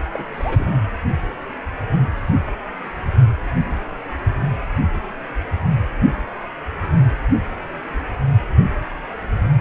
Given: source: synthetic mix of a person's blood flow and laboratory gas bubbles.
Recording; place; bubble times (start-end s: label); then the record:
Doppler ultrasound of blood flow; precordium
0.14-0.24 s: bubbles
0.34-0.76 s: bubbles
From the record:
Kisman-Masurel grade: 211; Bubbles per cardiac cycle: several, 3 to 8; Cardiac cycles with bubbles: 1 to 10%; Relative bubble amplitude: barely perceptible (0.100 to 0.250); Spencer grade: 1 (occasional bubble signal discernible with the cardiac motion signal, with majority of cardiac periods free of bubbles); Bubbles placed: anywhere in the cardiac cycle